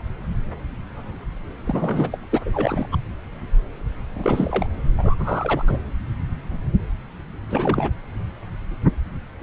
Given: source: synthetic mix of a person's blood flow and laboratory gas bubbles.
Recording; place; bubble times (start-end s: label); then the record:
Doppler ultrasound of blood flow; subclavian vein
1.67-2.18 s: bubbles
2.32-2.40 s: bubbles
2.45-2.87 s: bubbles
2.91-2.97 s: bubbles
4.15-4.67 s: bubbles
4.97-5.15 s: bubbles
5.19-5.80 s: bubbles
7.49-7.90 s: bubbles
9.41-9.43 s: bubbles
From the record:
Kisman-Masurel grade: 332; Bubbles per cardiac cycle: rolling drumbeat, 9 or more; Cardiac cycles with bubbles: 50 to 99%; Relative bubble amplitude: moderate (0.250 to 0.450); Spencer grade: 3 (all of the cardiac periods contain showers or single bubble signals, but not dominating or overriding the cardiac motion signals); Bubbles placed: anywhere in the cardiac cycle